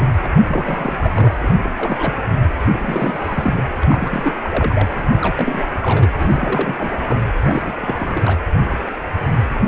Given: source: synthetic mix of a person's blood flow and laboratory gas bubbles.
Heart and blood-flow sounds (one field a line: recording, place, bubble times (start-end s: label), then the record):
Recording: Doppler ultrasound of blood flow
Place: precordium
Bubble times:
0.00-0.13 s: bubbles
0.23-0.42 s: bubbles
0.47-1.34 s: bubbles
1.43-1.54 s: bubbles
1.63-1.70 s: bubbles
1.77-2.14 s: bubbles
2.56-3.64 s: bubbles
3.82-3.85 s: bubbles
3.89-4.33 s: bubbles
4.42-4.88 s: bubbles
5.16-5.34 s: bubbles
5.37-5.66 s: bubbles
5.82-6.11 s: bubbles
6.18-6.75 s: bubbles
6.79-6.92 s: bubbles
7.06-7.25 s: bubbles
7.38-7.74 s: bubbles
7.82-8.40 s: bubbles
From the record:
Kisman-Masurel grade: 332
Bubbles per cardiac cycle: rolling drumbeat, 9 or more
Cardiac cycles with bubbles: 50 to 99%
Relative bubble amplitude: moderate (0.250 to 0.450)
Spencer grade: 3 (all of the cardiac periods contain showers or single bubble signals, but not dominating or overriding the cardiac motion signals)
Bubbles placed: anywhere in the cardiac cycle